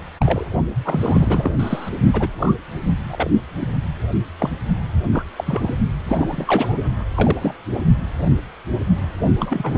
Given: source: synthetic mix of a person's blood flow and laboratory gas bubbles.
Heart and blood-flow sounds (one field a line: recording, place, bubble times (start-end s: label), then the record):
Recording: Doppler ultrasound of blood flow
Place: precordium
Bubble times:
0.20-0.46 s: bubbles
0.84-1.55 s: bubbles
1.59-1.90 s: bubbles
2.13-2.28 s: bubbles
2.38-2.54 s: bubbles
3.10-3.30 s: bubbles
3.60-3.67 s: bubbles
4.38-4.50 s: bubbles
5.12-5.23 s: bubbles
5.36-5.73 s: bubbles
6.08-6.86 s: bubbles
7.15-7.36 s: bubbles
7.41-7.54 s: bubbles
7.75-7.82 s: bubbles
9.38-9.78 s: bubbles
From the record:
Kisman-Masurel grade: 232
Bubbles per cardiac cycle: several, 3 to 8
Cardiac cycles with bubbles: 50 to 99%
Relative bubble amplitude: moderate (0.250 to 0.450)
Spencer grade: 3 (all of the cardiac periods contain showers or single bubble signals, but not dominating or overriding the cardiac motion signals)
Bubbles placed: only in the low amplitude regions of the cardiac cycle